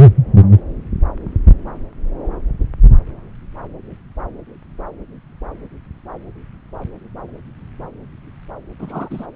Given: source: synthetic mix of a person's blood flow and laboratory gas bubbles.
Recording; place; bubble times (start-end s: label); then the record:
Doppler ultrasound of blood flow; subclavian vein
8.79-9.26 s: bubbles
From the record:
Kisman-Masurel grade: 112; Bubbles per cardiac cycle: 1 to 2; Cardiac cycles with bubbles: 1 to 10%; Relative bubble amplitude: moderate (0.250 to 0.450); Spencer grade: 1 (occasional bubble signal discernible with the cardiac motion signal, with majority of cardiac periods free of bubbles); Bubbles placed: anywhere in the cardiac cycle